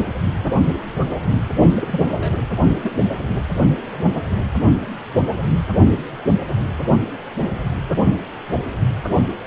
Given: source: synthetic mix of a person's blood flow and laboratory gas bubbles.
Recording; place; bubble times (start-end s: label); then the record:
Doppler ultrasound of blood flow; precordium
1.75-2.00 s: bubbles
2.17-2.38 s: bubbles
2.83-2.91 s: bubbles
From the record:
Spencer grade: 2 (many but less than half of the cardiac periods contain bubble signals, singularly or in groups); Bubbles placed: anywhere in the cardiac cycle